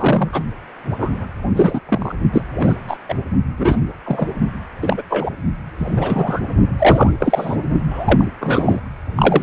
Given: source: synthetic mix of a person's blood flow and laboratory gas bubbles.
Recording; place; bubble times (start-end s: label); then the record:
Doppler ultrasound of blood flow; precordium
0.00-0.42 s: bubbles
1.00-1.27 s: bubbles
1.54-1.80 s: bubbles
1.89-2.15 s: bubbles
2.33-2.42 s: bubbles
2.59-2.77 s: bubbles
2.88-2.98 s: bubbles
3.08-3.15 s: bubbles
3.57-3.81 s: bubbles
4.04-4.27 s: bubbles
4.81-5.03 s: bubbles
5.09-5.30 s: bubbles
5.78-6.39 s: bubbles
6.78-7.11 s: bubbles
7.19-7.62 s: bubbles
7.90-8.25 s: bubbles
8.40-8.80 s: bubbles
9.17-9.43 s: bubbles
From the record:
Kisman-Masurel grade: 233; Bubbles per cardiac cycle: several, 3 to 8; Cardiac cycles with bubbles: 50 to 99%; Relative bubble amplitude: loud (0.450 to 0.775); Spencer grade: 3 (all of the cardiac periods contain showers or single bubble signals, but not dominating or overriding the cardiac motion signals); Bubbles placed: only in the low amplitude regions of the cardiac cycle